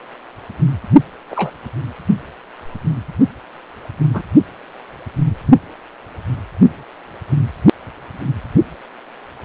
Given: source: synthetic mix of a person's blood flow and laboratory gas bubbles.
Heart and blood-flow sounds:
Doppler ultrasound of blood flow; precordium
1.30-1.51 s: bubbles
4.14-4.22 s: bubbles
From the record:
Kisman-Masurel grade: 122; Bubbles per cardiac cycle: 1 to 2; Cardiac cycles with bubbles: 10 to 50%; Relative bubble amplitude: moderate (0.250 to 0.450); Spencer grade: 2 (many but less than half of the cardiac periods contain bubble signals, singularly or in groups); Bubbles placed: anywhere in the cardiac cycle

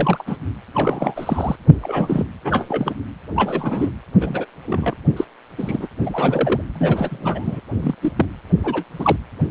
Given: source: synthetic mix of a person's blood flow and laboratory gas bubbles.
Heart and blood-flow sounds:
Doppler ultrasound of blood flow; precordium
0.00-0.23 s: bubbles
0.27-0.36 s: bubbles
0.74-1.56 s: bubbles
1.83-2.26 s: bubbles
2.44-2.94 s: bubbles
3.35-3.90 s: bubbles
4.21-4.45 s: bubbles
4.67-4.96 s: bubbles
5.17-5.25 s: bubbles
5.58-5.87 s: bubbles
6.01-6.61 s: bubbles
6.74-7.61 s: bubbles
7.79-7.95 s: bubbles
8.02-8.12 s: bubbles
8.16-8.26 s: bubbles
8.63-8.84 s: bubbles
8.98-9.16 s: bubbles
From the record:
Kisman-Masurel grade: 242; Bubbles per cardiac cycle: several, 3 to 8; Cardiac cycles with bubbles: 100%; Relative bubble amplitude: moderate (0.250 to 0.450); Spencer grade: 3 (all of the cardiac periods contain showers or single bubble signals, but not dominating or overriding the cardiac motion signals); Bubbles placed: anywhere in the cardiac cycle

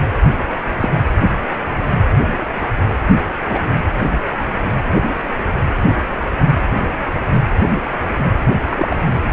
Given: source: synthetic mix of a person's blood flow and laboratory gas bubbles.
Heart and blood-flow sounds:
Doppler ultrasound of blood flow; precordium
0.22-0.37 s: bubbles
0.80-0.91 s: bubbles
3.49-3.70 s: bubbles
5.90-5.95 s: bubbles
8.69-8.96 s: bubbles
From the record:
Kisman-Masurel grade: 123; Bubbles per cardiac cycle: 1 to 2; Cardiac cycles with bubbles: 10 to 50%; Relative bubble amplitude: loud (0.450 to 0.775); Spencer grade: 2 (many but less than half of the cardiac periods contain bubble signals, singularly or in groups); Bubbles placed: anywhere in the cardiac cycle

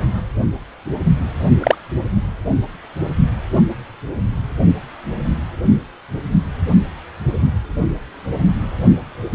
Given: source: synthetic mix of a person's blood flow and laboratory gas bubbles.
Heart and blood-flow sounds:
Doppler ultrasound of blood flow; precordium
1.59-1.76 s: bubbles
From the record:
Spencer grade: 2 (many but less than half of the cardiac periods contain bubble signals, singularly or in groups); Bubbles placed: only in the low amplitude regions of the cardiac cycle

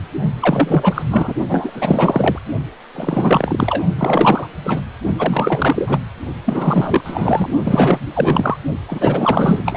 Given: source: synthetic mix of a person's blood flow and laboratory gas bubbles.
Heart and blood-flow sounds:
Doppler ultrasound of blood flow; precordium
0.41-1.03 s: bubbles
1.10-1.33 s: bubbles
1.49-2.39 s: bubbles
2.95-3.84 s: bubbles
3.98-4.47 s: bubbles
4.64-4.80 s: bubbles
5.18-5.99 s: bubbles
6.45-7.49 s: bubbles
7.64-7.99 s: bubbles
8.04-8.57 s: bubbles
8.88-9.77 s: bubbles
From the record:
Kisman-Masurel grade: 444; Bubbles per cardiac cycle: continuous sound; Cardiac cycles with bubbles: 100%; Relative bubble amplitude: maximal (0.775 to 0.999); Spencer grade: 4 (maximum detectable bubble signal sounding continuously throughout systole and diastole of every cardiac period, and overriding the amplitude of the normal cardiac signals); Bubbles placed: only in the low amplitude regions of the cardiac cycle

